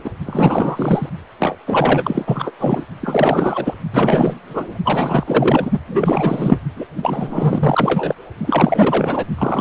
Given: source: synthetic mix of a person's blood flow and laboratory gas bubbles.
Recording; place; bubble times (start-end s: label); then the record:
Doppler ultrasound of blood flow; precordium
0.03-0.10 s: bubbles
0.26-1.10 s: bubbles
1.40-1.56 s: bubbles
1.66-2.51 s: bubbles
2.59-2.84 s: bubbles
3.01-3.77 s: bubbles
3.93-4.39 s: bubbles
4.47-4.78 s: bubbles
4.85-5.24 s: bubbles
5.27-5.71 s: bubbles
5.88-6.57 s: bubbles
6.76-6.86 s: bubbles
6.97-8.15 s: bubbles
8.38-9.25 s: bubbles
9.38-9.61 s: bubbles
From the record:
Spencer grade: 4 (maximum detectable bubble signal sounding continuously throughout systole and diastole of every cardiac period, and overriding the amplitude of the normal cardiac signals); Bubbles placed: only in the low amplitude regions of the cardiac cycle